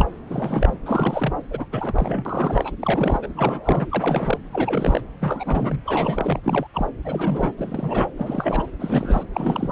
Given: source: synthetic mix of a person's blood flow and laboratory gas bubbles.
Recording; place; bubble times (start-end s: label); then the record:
Doppler ultrasound of blood flow; subclavian vein
0.00-0.06 s: bubbles
0.29-0.78 s: bubbles
0.85-1.33 s: bubbles
1.50-1.65 s: bubbles
1.72-2.74 s: bubbles
2.80-3.19 s: bubbles
3.22-3.27 s: bubbles
3.36-4.38 s: bubbles
4.53-5.01 s: bubbles
5.20-5.82 s: bubbles
5.86-6.40 s: bubbles
6.43-6.67 s: bubbles
6.74-6.87 s: bubbles
7.04-7.54 s: bubbles
7.58-8.12 s: bubbles
8.17-8.70 s: bubbles
8.79-9.26 s: bubbles
9.32-9.72 s: bubbles
From the record:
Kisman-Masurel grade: 342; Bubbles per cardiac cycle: rolling drumbeat, 9 or more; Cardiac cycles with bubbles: 100%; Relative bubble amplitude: moderate (0.250 to 0.450); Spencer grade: 3 (all of the cardiac periods contain showers or single bubble signals, but not dominating or overriding the cardiac motion signals); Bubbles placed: anywhere in the cardiac cycle